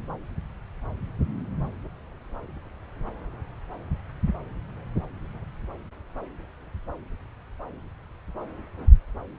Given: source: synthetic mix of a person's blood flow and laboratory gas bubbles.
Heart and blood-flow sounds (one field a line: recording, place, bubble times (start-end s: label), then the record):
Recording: Doppler ultrasound of blood flow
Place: subclavian vein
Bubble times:
no bubbles
From the record:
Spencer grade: 0 (complete lack of bubble signals)